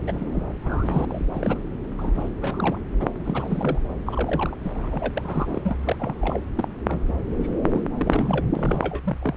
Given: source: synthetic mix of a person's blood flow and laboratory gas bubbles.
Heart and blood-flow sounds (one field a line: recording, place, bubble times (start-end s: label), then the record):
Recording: Doppler ultrasound of blood flow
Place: subclavian vein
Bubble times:
0.07-0.42 s: bubbles
0.60-1.05 s: bubbles
1.08-1.58 s: bubbles
1.98-2.29 s: bubbles
2.41-2.79 s: bubbles
3.00-3.07 s: bubbles
3.19-3.78 s: bubbles
4.05-4.58 s: bubbles
4.63-4.71 s: bubbles
4.74-5.11 s: bubbles
5.15-5.78 s: bubbles
5.84-5.96 s: bubbles
5.99-6.13 s: bubbles
6.21-6.41 s: bubbles
6.55-6.68 s: bubbles
6.88-7.01 s: bubbles
7.08-7.14 s: bubbles
7.36-7.55 s: bubbles
7.63-7.84 s: bubbles
7.97-8.45 s: bubbles
8.55-9.17 s: bubbles
9.21-9.34 s: bubbles
From the record:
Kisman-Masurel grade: 342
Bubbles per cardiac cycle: rolling drumbeat, 9 or more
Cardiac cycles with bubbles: 100%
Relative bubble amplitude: moderate (0.250 to 0.450)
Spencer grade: 3 (all of the cardiac periods contain showers or single bubble signals, but not dominating or overriding the cardiac motion signals)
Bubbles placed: anywhere in the cardiac cycle